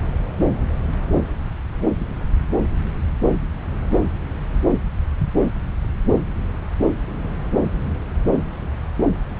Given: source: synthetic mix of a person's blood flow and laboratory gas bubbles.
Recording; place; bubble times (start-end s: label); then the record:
Doppler ultrasound of blood flow; subclavian vein
no bubbles
From the record:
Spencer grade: 0 (complete lack of bubble signals)